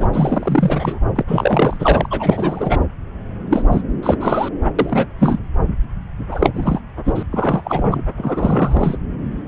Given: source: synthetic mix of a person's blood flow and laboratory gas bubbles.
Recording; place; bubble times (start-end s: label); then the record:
Doppler ultrasound of blood flow; subclavian vein
0.00-0.09 s: bubbles
0.12-0.99 s: bubbles
1.15-1.24 s: bubbles
1.27-2.07 s: bubbles
2.10-2.79 s: bubbles
3.50-3.62 s: bubbles
3.71-3.82 s: bubbles
4.03-4.17 s: bubbles
4.20-4.49 s: bubbles
4.79-5.06 s: bubbles
5.18-5.38 s: bubbles
6.31-6.50 s: bubbles
6.54-6.80 s: bubbles
7.05-7.23 s: bubbles
7.32-8.07 s: bubbles
8.17-8.98 s: bubbles
From the record:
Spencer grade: 3 (all of the cardiac periods contain showers or single bubble signals, but not dominating or overriding the cardiac motion signals); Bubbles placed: anywhere in the cardiac cycle